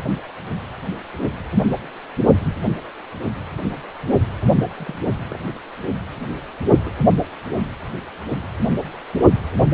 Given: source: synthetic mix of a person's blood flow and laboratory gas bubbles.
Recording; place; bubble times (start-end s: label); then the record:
Doppler ultrasound of blood flow; precordium
4.12-4.19 s: bubbles
4.75-4.99 s: bubbles
5.29-5.39 s: bubbles
6.85-6.92 s: bubbles
From the record:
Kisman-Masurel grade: 121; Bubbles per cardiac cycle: 1 to 2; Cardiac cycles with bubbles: 10 to 50%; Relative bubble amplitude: barely perceptible (0.100 to 0.250); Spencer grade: 2 (many but less than half of the cardiac periods contain bubble signals, singularly or in groups); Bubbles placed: only in the low amplitude regions of the cardiac cycle